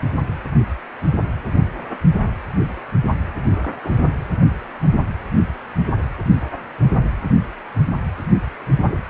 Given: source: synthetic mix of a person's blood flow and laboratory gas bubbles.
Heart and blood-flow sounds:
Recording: Doppler ultrasound of blood flow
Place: precordium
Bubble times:
3.52-3.94 s: bubbles
From the record:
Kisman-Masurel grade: 111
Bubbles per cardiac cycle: 1 to 2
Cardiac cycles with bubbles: 1 to 10%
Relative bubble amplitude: barely perceptible (0.100 to 0.250)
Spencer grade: 1 (occasional bubble signal discernible with the cardiac motion signal, with majority of cardiac periods free of bubbles)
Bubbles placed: anywhere in the cardiac cycle

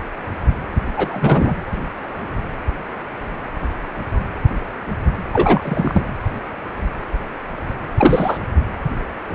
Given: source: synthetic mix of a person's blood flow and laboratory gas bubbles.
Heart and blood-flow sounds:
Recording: Doppler ultrasound of blood flow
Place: precordium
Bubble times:
0.95-1.56 s: bubbles
5.33-6.03 s: bubbles
7.97-8.38 s: bubbles
From the record:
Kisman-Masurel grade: 223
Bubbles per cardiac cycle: several, 3 to 8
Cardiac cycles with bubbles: 10 to 50%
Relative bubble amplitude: loud (0.450 to 0.775)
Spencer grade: 2 (many but less than half of the cardiac periods contain bubble signals, singularly or in groups)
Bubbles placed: anywhere in the cardiac cycle

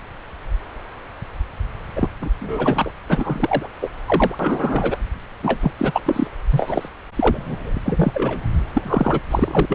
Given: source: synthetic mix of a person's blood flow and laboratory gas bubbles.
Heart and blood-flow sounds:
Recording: Doppler ultrasound of blood flow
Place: subclavian vein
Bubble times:
1.95-2.09 s: bubbles
2.22-2.31 s: bubbles
2.40-2.92 s: bubbles
3.09-3.71 s: bubbles
3.81-3.88 s: bubbles
4.06-4.35 s: bubbles
4.39-4.96 s: bubbles
5.42-5.71 s: bubbles
5.78-6.00 s: bubbles
6.05-6.27 s: bubbles
6.50-6.88 s: bubbles
7.16-7.81 s: bubbles
7.85-8.47 s: bubbles
8.73-9.20 s: bubbles
9.30-9.65 s: bubbles
9.68-9.75 s: bubbles
From the record:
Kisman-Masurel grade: 333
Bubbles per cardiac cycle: rolling drumbeat, 9 or more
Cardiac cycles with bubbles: 50 to 99%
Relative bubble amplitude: loud (0.450 to 0.775)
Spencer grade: 3 (all of the cardiac periods contain showers or single bubble signals, but not dominating or overriding the cardiac motion signals)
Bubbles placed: anywhere in the cardiac cycle

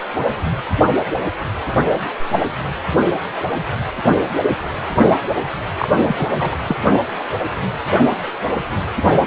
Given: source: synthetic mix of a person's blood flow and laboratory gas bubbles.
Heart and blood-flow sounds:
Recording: Doppler ultrasound of blood flow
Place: precordium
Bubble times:
5.79-5.88 s: bubbles
6.07-6.27 s: bubbles
6.36-6.57 s: bubbles
6.68-6.76 s: bubbles
From the record:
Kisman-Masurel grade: 212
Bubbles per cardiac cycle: several, 3 to 8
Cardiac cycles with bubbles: 1 to 10%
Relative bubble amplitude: moderate (0.250 to 0.450)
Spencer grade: 1 (occasional bubble signal discernible with the cardiac motion signal, with majority of cardiac periods free of bubbles)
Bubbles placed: only in the low amplitude regions of the cardiac cycle

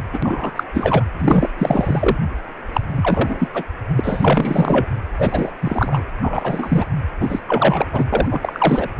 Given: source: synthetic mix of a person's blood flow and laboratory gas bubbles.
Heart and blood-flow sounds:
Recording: Doppler ultrasound of blood flow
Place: precordium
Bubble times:
0.13-0.19 s: bubbles
0.23-0.52 s: bubbles
0.55-0.64 s: bubbles
0.74-1.06 s: bubbles
1.18-1.50 s: bubbles
1.58-2.17 s: bubbles
2.73-2.81 s: bubbles
2.96-3.48 s: bubbles
3.54-3.65 s: bubbles
3.96-4.87 s: bubbles
5.18-5.53 s: bubbles
5.62-6.03 s: bubbles
6.20-6.86 s: bubbles
7.20-7.43 s: bubbles
7.47-7.88 s: bubbles
7.93-8.04 s: bubbles
8.12-8.28 s: bubbles
8.30-8.88 s: bubbles
From the record:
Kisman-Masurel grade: 343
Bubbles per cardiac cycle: rolling drumbeat, 9 or more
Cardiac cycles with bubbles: 100%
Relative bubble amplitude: loud (0.450 to 0.775)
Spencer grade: 3 (all of the cardiac periods contain showers or single bubble signals, but not dominating or overriding the cardiac motion signals)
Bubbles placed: anywhere in the cardiac cycle

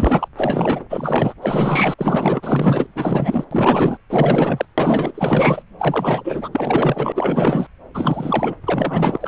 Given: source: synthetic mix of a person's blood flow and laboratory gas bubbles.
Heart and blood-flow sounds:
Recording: Doppler ultrasound of blood flow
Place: subclavian vein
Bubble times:
0.00-0.28 s: bubbles
0.36-0.85 s: bubbles
0.90-1.33 s: bubbles
1.42-1.94 s: bubbles
1.98-2.86 s: bubbles
2.95-3.45 s: bubbles
3.51-3.98 s: bubbles
4.10-4.65 s: bubbles
4.78-5.62 s: bubbles
5.79-6.49 s: bubbles
6.53-7.12 s: bubbles
7.15-7.67 s: bubbles
7.94-8.54 s: bubbles
8.66-9.18 s: bubbles
9.21-9.28 s: bubbles
From the record:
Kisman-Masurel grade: 444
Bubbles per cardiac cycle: continuous sound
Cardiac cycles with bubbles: 100%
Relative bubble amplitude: maximal (0.775 to 0.999)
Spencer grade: 4 (maximum detectable bubble signal sounding continuously throughout systole and diastole of every cardiac period, and overriding the amplitude of the normal cardiac signals)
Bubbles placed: anywhere in the cardiac cycle

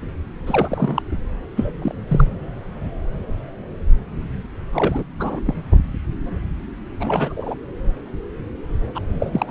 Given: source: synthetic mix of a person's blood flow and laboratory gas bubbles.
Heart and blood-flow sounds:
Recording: Doppler ultrasound of blood flow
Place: subclavian vein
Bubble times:
0.46-1.02 s: bubbles
1.55-1.71 s: bubbles
1.81-1.95 s: bubbles
2.08-2.36 s: bubbles
4.71-5.04 s: bubbles
5.20-5.40 s: bubbles
5.45-5.54 s: bubbles
6.99-7.55 s: bubbles
8.95-8.99 s: bubbles
9.20-9.50 s: bubbles
From the record:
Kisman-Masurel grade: 222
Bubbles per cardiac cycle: several, 3 to 8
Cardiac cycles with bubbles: 10 to 50%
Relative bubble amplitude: moderate (0.250 to 0.450)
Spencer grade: 2 (many but less than half of the cardiac periods contain bubble signals, singularly or in groups)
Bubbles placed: anywhere in the cardiac cycle

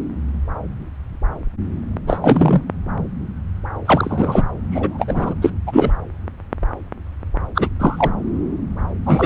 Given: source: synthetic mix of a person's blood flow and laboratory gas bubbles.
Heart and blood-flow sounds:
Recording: Doppler ultrasound of blood flow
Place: subclavian vein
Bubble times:
2.07-2.62 s: bubbles
3.85-4.46 s: bubbles
4.71-5.34 s: bubbles
5.42-5.51 s: bubbles
5.67-5.92 s: bubbles
7.54-7.68 s: bubbles
7.79-8.12 s: bubbles
9.06-9.26 s: bubbles
From the record:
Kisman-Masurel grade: 233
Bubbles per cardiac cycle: several, 3 to 8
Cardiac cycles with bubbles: 50 to 99%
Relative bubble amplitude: loud (0.450 to 0.775)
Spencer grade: 3 (all of the cardiac periods contain showers or single bubble signals, but not dominating or overriding the cardiac motion signals)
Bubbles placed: anywhere in the cardiac cycle

